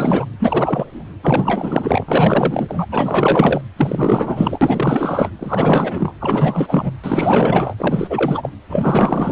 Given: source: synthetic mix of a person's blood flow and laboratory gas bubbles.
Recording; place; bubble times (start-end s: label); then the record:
Doppler ultrasound of blood flow; precordium
0.00-0.25 s: bubbles
0.39-1.04 s: bubbles
1.22-2.86 s: bubbles
2.92-3.61 s: bubbles
3.76-5.30 s: bubbles
5.39-6.12 s: bubbles
6.20-6.91 s: bubbles
7.04-7.74 s: bubbles
7.78-8.50 s: bubbles
8.69-9.32 s: bubbles
From the record:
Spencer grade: 4 (maximum detectable bubble signal sounding continuously throughout systole and diastole of every cardiac period, and overriding the amplitude of the normal cardiac signals); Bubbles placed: anywhere in the cardiac cycle